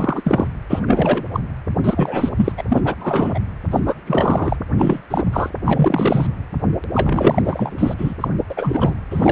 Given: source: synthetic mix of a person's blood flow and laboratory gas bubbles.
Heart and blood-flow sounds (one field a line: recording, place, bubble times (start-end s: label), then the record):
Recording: Doppler ultrasound of blood flow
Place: precordium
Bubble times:
0.00-0.47 s: bubbles
0.69-0.80 s: bubbles
0.87-1.25 s: bubbles
1.32-1.40 s: bubbles
1.84-2.29 s: bubbles
2.36-2.52 s: bubbles
2.57-2.61 s: bubbles
2.68-2.81 s: bubbles
2.84-2.95 s: bubbles
2.99-3.40 s: bubbles
3.70-3.81 s: bubbles
3.85-3.94 s: bubbles
4.07-4.57 s: bubbles
4.78-5.02 s: bubbles
5.10-5.24 s: bubbles
5.33-5.50 s: bubbles
5.65-6.27 s: bubbles
6.94-7.94 s: bubbles
7.98-8.14 s: bubbles
8.20-8.28 s: bubbles
8.50-8.98 s: bubbles
9.10-9.32 s: bubbles
From the record:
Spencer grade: 3 (all of the cardiac periods contain showers or single bubble signals, but not dominating or overriding the cardiac motion signals)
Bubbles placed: anywhere in the cardiac cycle